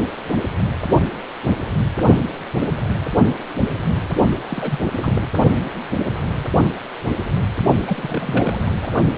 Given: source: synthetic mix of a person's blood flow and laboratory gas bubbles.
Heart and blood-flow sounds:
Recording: Doppler ultrasound of blood flow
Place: precordium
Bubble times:
4.48-4.79 s: bubbles
4.97-5.27 s: bubbles
7.88-8.72 s: bubbles
8.81-8.89 s: bubbles
From the record:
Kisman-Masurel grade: 221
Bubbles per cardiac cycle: several, 3 to 8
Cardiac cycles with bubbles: 10 to 50%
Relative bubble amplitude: barely perceptible (0.100 to 0.250)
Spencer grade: 2 (many but less than half of the cardiac periods contain bubble signals, singularly or in groups)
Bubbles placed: only in the low amplitude regions of the cardiac cycle

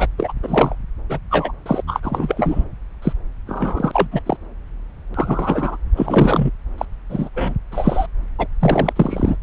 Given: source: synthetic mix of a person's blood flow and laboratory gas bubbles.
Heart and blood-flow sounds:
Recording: Doppler ultrasound of blood flow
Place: subclavian vein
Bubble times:
0.00-0.07 s: bubbles
0.17-0.33 s: bubbles
0.43-0.75 s: bubbles
1.09-1.19 s: bubbles
1.30-1.52 s: bubbles
1.66-1.83 s: bubbles
1.86-2.65 s: bubbles
3.02-3.13 s: bubbles
3.47-4.08 s: bubbles
4.11-4.22 s: bubbles
4.26-4.37 s: bubbles
5.13-5.77 s: bubbles
5.96-6.50 s: bubbles
6.78-6.86 s: bubbles
7.09-7.29 s: bubbles
7.34-7.54 s: bubbles
7.71-8.06 s: bubbles
8.38-8.47 s: bubbles
8.60-8.93 s: bubbles
8.96-9.37 s: bubbles
From the record:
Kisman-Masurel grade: 243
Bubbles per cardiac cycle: several, 3 to 8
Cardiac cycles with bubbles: 100%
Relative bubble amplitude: loud (0.450 to 0.775)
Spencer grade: 3 (all of the cardiac periods contain showers or single bubble signals, but not dominating or overriding the cardiac motion signals)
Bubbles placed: anywhere in the cardiac cycle

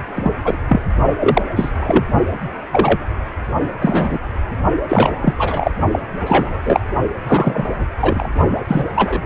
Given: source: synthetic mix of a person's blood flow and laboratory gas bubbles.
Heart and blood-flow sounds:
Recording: Doppler ultrasound of blood flow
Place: precordium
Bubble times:
0.15-0.31 s: bubbles
0.45-0.57 s: bubbles
0.68-0.82 s: bubbles
1.20-1.42 s: bubbles
1.56-1.75 s: bubbles
1.80-2.04 s: bubbles
2.71-3.08 s: bubbles
3.81-4.20 s: bubbles
4.89-5.34 s: bubbles
5.37-5.71 s: bubbles
5.92-6.00 s: bubbles
6.26-6.59 s: bubbles
6.65-6.80 s: bubbles
7.27-7.64 s: bubbles
8.01-8.29 s: bubbles
8.68-8.86 s: bubbles
8.95-9.21 s: bubbles
From the record:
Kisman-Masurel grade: 243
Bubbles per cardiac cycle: several, 3 to 8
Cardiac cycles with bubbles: 100%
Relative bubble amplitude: loud (0.450 to 0.775)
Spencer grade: 3 (all of the cardiac periods contain showers or single bubble signals, but not dominating or overriding the cardiac motion signals)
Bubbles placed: only in the low amplitude regions of the cardiac cycle

